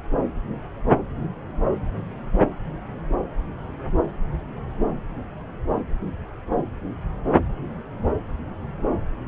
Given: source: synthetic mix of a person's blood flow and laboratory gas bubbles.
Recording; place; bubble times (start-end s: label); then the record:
Doppler ultrasound of blood flow; subclavian vein
no bubbles
From the record:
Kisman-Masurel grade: 000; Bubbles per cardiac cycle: 0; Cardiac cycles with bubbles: 0%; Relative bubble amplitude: no bubbles discernible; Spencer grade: 0 (complete lack of bubble signals)